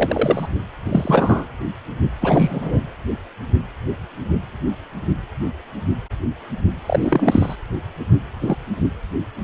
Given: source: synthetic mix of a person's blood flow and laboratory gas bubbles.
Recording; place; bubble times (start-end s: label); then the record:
Doppler ultrasound of blood flow; precordium
0.00-0.48 s: bubbles
0.84-1.48 s: bubbles
2.21-2.85 s: bubbles
6.86-7.55 s: bubbles
8.41-8.57 s: bubbles
From the record:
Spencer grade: 2 (many but less than half of the cardiac periods contain bubble signals, singularly or in groups); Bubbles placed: anywhere in the cardiac cycle